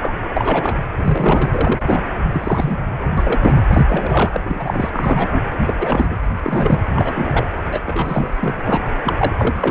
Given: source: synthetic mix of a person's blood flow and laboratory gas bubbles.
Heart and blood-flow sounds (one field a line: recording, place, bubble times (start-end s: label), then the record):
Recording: Doppler ultrasound of blood flow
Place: precordium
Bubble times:
0.00-0.12 s: bubbles
0.33-0.78 s: bubbles
0.98-1.81 s: bubbles
1.87-2.03 s: bubbles
2.32-2.90 s: bubbles
3.17-3.57 s: bubbles
3.69-3.83 s: bubbles
3.88-4.41 s: bubbles
4.45-4.90 s: bubbles
4.92-5.43 s: bubbles
5.58-5.73 s: bubbles
5.79-6.17 s: bubbles
6.42-6.80 s: bubbles
6.91-7.46 s: bubbles
7.71-7.81 s: bubbles
7.85-8.34 s: bubbles
8.40-8.54 s: bubbles
8.65-8.90 s: bubbles
9.04-9.71 s: bubbles
From the record:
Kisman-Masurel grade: 342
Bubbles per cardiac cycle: rolling drumbeat, 9 or more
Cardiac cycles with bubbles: 100%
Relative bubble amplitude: moderate (0.250 to 0.450)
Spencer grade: 3 (all of the cardiac periods contain showers or single bubble signals, but not dominating or overriding the cardiac motion signals)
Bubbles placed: anywhere in the cardiac cycle